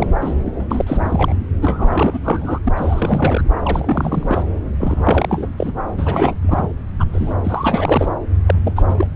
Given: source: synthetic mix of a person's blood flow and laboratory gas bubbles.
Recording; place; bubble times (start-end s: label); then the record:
Doppler ultrasound of blood flow; subclavian vein
0.00-0.07 s: bubbles
0.20-0.35 s: bubbles
0.45-0.66 s: bubbles
0.71-1.35 s: bubbles
1.61-2.19 s: bubbles
2.24-2.58 s: bubbles
2.64-2.72 s: bubbles
2.75-3.45 s: bubbles
3.63-4.43 s: bubbles
4.79-5.49 s: bubbles
5.58-5.72 s: bubbles
5.97-6.34 s: bubbles
6.42-6.67 s: bubbles
6.99-7.05 s: bubbles
7.12-7.35 s: bubbles
7.43-8.08 s: bubbles
8.46-8.54 s: bubbles
8.63-8.73 s: bubbles
8.75-8.84 s: bubbles
8.88-8.95 s: bubbles
8.97-9.07 s: bubbles
From the record:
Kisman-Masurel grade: 342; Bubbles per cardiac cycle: rolling drumbeat, 9 or more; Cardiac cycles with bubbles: 100%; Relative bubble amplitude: moderate (0.250 to 0.450); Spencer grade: 3 (all of the cardiac periods contain showers or single bubble signals, but not dominating or overriding the cardiac motion signals); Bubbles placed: anywhere in the cardiac cycle